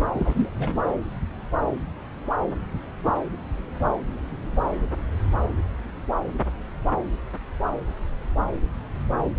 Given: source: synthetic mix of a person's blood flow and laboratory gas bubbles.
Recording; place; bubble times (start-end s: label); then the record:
Doppler ultrasound of blood flow; subclavian vein
0.14-0.49 s: bubbles
0.57-0.81 s: bubbles
From the record:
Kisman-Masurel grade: 221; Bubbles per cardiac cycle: several, 3 to 8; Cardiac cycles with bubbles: 10 to 50%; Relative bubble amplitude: barely perceptible (0.100 to 0.250); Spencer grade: 2 (many but less than half of the cardiac periods contain bubble signals, singularly or in groups); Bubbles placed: anywhere in the cardiac cycle